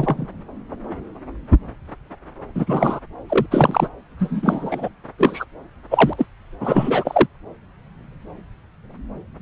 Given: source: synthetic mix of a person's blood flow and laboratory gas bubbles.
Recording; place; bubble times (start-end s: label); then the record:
Doppler ultrasound of blood flow; subclavian vein
0.00-0.28 s: bubbles
2.54-3.00 s: bubbles
3.29-3.46 s: bubbles
3.50-3.88 s: bubbles
4.19-4.88 s: bubbles
5.18-5.45 s: bubbles
5.91-6.25 s: bubbles
6.60-7.26 s: bubbles
From the record:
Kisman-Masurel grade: 233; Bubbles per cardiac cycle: several, 3 to 8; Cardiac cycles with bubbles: 50 to 99%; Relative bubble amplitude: loud (0.450 to 0.775); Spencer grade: 3 (all of the cardiac periods contain showers or single bubble signals, but not dominating or overriding the cardiac motion signals); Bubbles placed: anywhere in the cardiac cycle